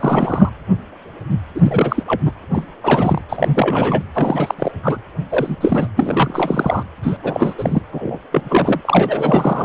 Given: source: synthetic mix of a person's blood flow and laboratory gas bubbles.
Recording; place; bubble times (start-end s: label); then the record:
Doppler ultrasound of blood flow; precordium
0.00-0.50 s: bubbles
1.54-2.03 s: bubbles
2.06-2.21 s: bubbles
2.25-2.31 s: bubbles
2.53-2.63 s: bubbles
2.83-3.21 s: bubbles
3.28-4.02 s: bubbles
4.14-4.54 s: bubbles
4.58-4.71 s: bubbles
4.83-4.98 s: bubbles
5.30-5.56 s: bubbles
5.61-5.88 s: bubbles
5.96-6.83 s: bubbles
7.02-7.18 s: bubbles
7.23-7.54 s: bubbles
7.58-7.82 s: bubbles
7.92-8.18 s: bubbles
8.31-8.81 s: bubbles
8.85-9.65 s: bubbles
From the record:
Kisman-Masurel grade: 333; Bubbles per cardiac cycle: rolling drumbeat, 9 or more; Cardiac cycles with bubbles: 50 to 99%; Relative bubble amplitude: loud (0.450 to 0.775); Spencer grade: 3 (all of the cardiac periods contain showers or single bubble signals, but not dominating or overriding the cardiac motion signals); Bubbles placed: anywhere in the cardiac cycle